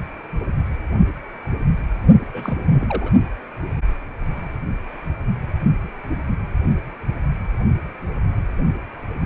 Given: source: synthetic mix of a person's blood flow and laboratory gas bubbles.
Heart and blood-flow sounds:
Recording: Doppler ultrasound of blood flow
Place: precordium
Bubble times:
2.33-3.10 s: bubbles
From the record:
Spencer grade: 1 (occasional bubble signal discernible with the cardiac motion signal, with majority of cardiac periods free of bubbles)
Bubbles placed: only in the low amplitude regions of the cardiac cycle

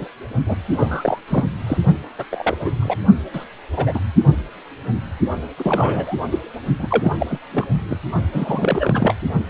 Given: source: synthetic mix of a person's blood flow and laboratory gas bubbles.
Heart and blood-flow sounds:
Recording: Doppler ultrasound of blood flow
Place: precordium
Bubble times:
0.00-0.08 s: bubbles
0.46-0.56 s: bubbles
0.72-1.20 s: bubbles
1.28-1.45 s: bubbles
1.67-1.78 s: bubbles
2.18-2.25 s: bubbles
2.29-2.56 s: bubbles
2.65-2.75 s: bubbles
2.81-2.97 s: bubbles
3.33-3.45 s: bubbles
3.73-3.99 s: bubbles
5.57-6.17 s: bubbles
6.31-6.39 s: bubbles
6.78-7.12 s: bubbles
7.17-7.26 s: bubbles
7.29-7.38 s: bubbles
7.51-7.65 s: bubbles
7.89-7.99 s: bubbles
8.32-9.15 s: bubbles
9.48-9.50 s: bubbles
From the record:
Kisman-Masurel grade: 242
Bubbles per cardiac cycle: several, 3 to 8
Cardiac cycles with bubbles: 100%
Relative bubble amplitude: moderate (0.250 to 0.450)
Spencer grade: 3 (all of the cardiac periods contain showers or single bubble signals, but not dominating or overriding the cardiac motion signals)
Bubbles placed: only in the low amplitude regions of the cardiac cycle

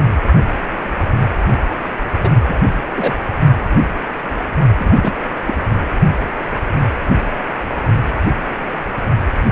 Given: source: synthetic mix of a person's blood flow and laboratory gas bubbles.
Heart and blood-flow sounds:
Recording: Doppler ultrasound of blood flow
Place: precordium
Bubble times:
2.19-2.29 s: bubbles
2.46-2.60 s: bubbles
2.94-3.13 s: bubbles
4.79-5.12 s: bubbles
5.47-5.54 s: bubbles
From the record:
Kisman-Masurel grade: 223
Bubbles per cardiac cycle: several, 3 to 8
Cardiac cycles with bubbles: 10 to 50%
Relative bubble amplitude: loud (0.450 to 0.775)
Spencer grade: 2 (many but less than half of the cardiac periods contain bubble signals, singularly or in groups)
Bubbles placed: only in the low amplitude regions of the cardiac cycle

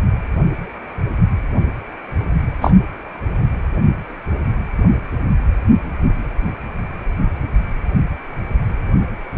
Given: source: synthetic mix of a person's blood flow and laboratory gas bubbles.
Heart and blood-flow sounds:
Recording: Doppler ultrasound of blood flow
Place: precordium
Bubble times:
2.61-2.73 s: bubbles
From the record:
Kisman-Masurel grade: 113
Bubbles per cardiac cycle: 1 to 2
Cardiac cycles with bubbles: 1 to 10%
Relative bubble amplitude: loud (0.450 to 0.775)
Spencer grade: 1 (occasional bubble signal discernible with the cardiac motion signal, with majority of cardiac periods free of bubbles)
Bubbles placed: anywhere in the cardiac cycle

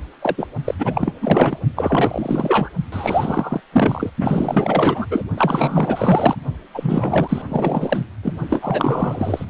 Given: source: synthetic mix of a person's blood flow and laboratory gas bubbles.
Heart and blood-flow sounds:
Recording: Doppler ultrasound of blood flow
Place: precordium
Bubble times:
0.21-0.47 s: bubbles
0.65-0.74 s: bubbles
0.78-1.13 s: bubbles
1.21-1.63 s: bubbles
1.75-2.69 s: bubbles
2.92-3.60 s: bubbles
3.72-4.10 s: bubbles
4.20-5.06 s: bubbles
5.10-5.23 s: bubbles
5.37-6.35 s: bubbles
6.74-7.42 s: bubbles
7.48-8.01 s: bubbles
8.23-8.34 s: bubbles
8.50-9.45 s: bubbles
From the record:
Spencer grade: 4 (maximum detectable bubble signal sounding continuously throughout systole and diastole of every cardiac period, and overriding the amplitude of the normal cardiac signals)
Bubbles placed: only in the low amplitude regions of the cardiac cycle

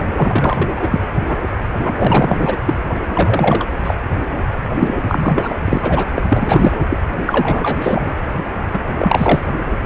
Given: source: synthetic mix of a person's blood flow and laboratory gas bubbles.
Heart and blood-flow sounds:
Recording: Doppler ultrasound of blood flow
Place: precordium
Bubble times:
0.14-0.89 s: bubbles
0.91-1.00 s: bubbles
1.27-1.36 s: bubbles
1.81-2.56 s: bubbles
2.65-2.74 s: bubbles
2.96-3.01 s: bubbles
3.08-3.67 s: bubbles
3.83-3.95 s: bubbles
4.79-4.95 s: bubbles
5.03-5.54 s: bubbles
5.65-6.04 s: bubbles
6.15-6.23 s: bubbles
6.28-6.78 s: bubbles
6.89-6.98 s: bubbles
7.26-8.12 s: bubbles
8.72-8.79 s: bubbles
8.98-9.46 s: bubbles
From the record:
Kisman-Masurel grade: 333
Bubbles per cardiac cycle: rolling drumbeat, 9 or more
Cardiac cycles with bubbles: 50 to 99%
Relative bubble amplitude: loud (0.450 to 0.775)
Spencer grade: 3 (all of the cardiac periods contain showers or single bubble signals, but not dominating or overriding the cardiac motion signals)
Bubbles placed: anywhere in the cardiac cycle

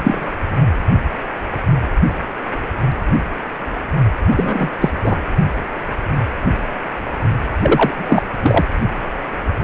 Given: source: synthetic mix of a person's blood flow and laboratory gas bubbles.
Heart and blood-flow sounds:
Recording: Doppler ultrasound of blood flow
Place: precordium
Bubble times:
0.00-0.26 s: bubbles
4.30-4.70 s: bubbles
4.80-4.90 s: bubbles
5.04-5.17 s: bubbles
7.62-7.95 s: bubbles
7.97-8.23 s: bubbles
8.43-8.65 s: bubbles
From the record:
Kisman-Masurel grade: 223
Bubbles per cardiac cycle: several, 3 to 8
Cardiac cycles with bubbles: 10 to 50%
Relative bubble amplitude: loud (0.450 to 0.775)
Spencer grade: 2 (many but less than half of the cardiac periods contain bubble signals, singularly or in groups)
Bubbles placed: anywhere in the cardiac cycle

